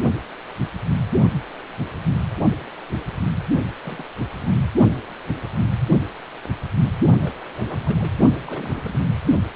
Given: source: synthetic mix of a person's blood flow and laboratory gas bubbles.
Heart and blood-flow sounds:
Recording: Doppler ultrasound of blood flow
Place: precordium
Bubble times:
3.83-4.05 s: bubbles
4.40-4.54 s: bubbles
7.21-7.33 s: bubbles
7.41-7.45 s: bubbles
7.56-7.82 s: bubbles
7.85-8.13 s: bubbles
8.44-8.98 s: bubbles
From the record:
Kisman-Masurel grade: 221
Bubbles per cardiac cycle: several, 3 to 8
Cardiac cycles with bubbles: 10 to 50%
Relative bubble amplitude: barely perceptible (0.100 to 0.250)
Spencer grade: 2 (many but less than half of the cardiac periods contain bubble signals, singularly or in groups)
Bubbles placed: only in the low amplitude regions of the cardiac cycle

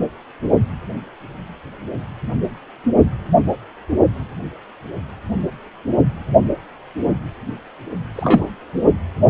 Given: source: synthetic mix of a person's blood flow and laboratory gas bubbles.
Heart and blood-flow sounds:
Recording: Doppler ultrasound of blood flow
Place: precordium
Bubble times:
8.12-8.45 s: bubbles
From the record:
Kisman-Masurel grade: 113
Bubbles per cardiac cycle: 1 to 2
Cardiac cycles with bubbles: 1 to 10%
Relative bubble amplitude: loud (0.450 to 0.775)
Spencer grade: 1 (occasional bubble signal discernible with the cardiac motion signal, with majority of cardiac periods free of bubbles)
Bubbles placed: only in the low amplitude regions of the cardiac cycle

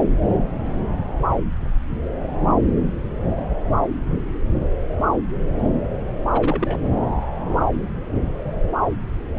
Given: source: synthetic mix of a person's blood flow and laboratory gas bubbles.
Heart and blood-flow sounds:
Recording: Doppler ultrasound of blood flow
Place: subclavian vein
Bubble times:
6.30-6.79 s: bubbles
From the record:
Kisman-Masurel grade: 211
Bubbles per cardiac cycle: several, 3 to 8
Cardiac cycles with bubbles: 1 to 10%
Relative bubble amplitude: barely perceptible (0.100 to 0.250)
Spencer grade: 1 (occasional bubble signal discernible with the cardiac motion signal, with majority of cardiac periods free of bubbles)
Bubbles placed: anywhere in the cardiac cycle

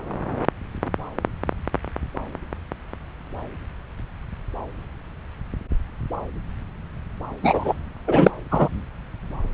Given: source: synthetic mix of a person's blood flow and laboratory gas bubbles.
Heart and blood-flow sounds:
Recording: Doppler ultrasound of blood flow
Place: subclavian vein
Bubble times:
7.42-7.74 s: bubbles
8.07-8.31 s: bubbles
8.51-8.69 s: bubbles
From the record:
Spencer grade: 1 (occasional bubble signal discernible with the cardiac motion signal, with majority of cardiac periods free of bubbles)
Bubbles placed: anywhere in the cardiac cycle

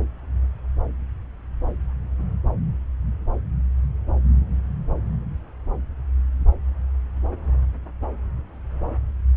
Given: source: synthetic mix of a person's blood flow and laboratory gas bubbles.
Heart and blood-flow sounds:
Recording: Doppler ultrasound of blood flow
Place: subclavian vein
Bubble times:
no bubbles
From the record:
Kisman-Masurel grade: 000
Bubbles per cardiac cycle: 0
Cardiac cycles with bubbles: 0%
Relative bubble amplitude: no bubbles discernible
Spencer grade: 0 (complete lack of bubble signals)

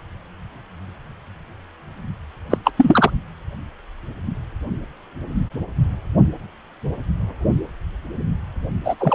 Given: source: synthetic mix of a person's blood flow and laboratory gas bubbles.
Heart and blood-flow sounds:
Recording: Doppler ultrasound of blood flow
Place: precordium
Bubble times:
2.50-2.58 s: bubbles
2.64-2.71 s: bubbles
2.77-3.11 s: bubbles
8.84-8.95 s: bubbles
8.99-9.15 s: bubbles
From the record:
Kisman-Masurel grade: 223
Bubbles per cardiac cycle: several, 3 to 8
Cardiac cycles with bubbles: 10 to 50%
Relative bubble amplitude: loud (0.450 to 0.775)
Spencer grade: 2 (many but less than half of the cardiac periods contain bubble signals, singularly or in groups)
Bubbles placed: only in the low amplitude regions of the cardiac cycle

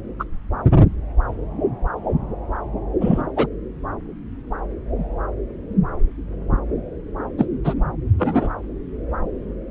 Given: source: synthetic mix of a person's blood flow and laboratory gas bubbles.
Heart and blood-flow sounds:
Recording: Doppler ultrasound of blood flow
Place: subclavian vein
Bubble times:
0.19-0.24 s: bubbles
3.01-3.22 s: bubbles
3.36-3.46 s: bubbles
7.38-7.46 s: bubbles
7.64-7.74 s: bubbles
8.18-8.48 s: bubbles
From the record:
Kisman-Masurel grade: 123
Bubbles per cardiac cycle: 1 to 2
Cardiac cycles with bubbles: 10 to 50%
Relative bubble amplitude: loud (0.450 to 0.775)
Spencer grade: 2 (many but less than half of the cardiac periods contain bubble signals, singularly or in groups)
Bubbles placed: anywhere in the cardiac cycle

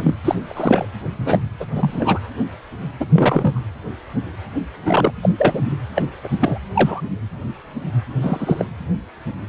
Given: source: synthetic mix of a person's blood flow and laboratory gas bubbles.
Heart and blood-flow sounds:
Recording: Doppler ultrasound of blood flow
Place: precordium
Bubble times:
0.00-0.16 s: bubbles
0.25-0.35 s: bubbles
0.47-0.87 s: bubbles
1.19-1.40 s: bubbles
1.59-1.66 s: bubbles
1.75-2.19 s: bubbles
3.00-3.06 s: bubbles
3.13-3.60 s: bubbles
4.73-5.12 s: bubbles
5.23-5.29 s: bubbles
5.38-5.66 s: bubbles
5.95-6.04 s: bubbles
6.23-6.29 s: bubbles
6.40-6.58 s: bubbles
6.75-7.01 s: bubbles
8.21-8.67 s: bubbles
From the record:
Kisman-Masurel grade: 233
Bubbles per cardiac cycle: several, 3 to 8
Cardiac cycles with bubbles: 50 to 99%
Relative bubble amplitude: loud (0.450 to 0.775)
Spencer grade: 3 (all of the cardiac periods contain showers or single bubble signals, but not dominating or overriding the cardiac motion signals)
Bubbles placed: anywhere in the cardiac cycle

